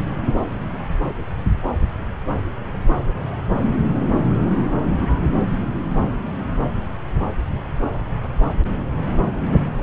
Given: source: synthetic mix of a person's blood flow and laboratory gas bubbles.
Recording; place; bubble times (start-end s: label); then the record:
Doppler ultrasound of blood flow; subclavian vein
no bubbles
From the record:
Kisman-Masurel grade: 000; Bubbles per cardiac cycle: 0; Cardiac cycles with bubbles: 0%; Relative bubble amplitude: no bubbles discernible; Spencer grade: 0 (complete lack of bubble signals)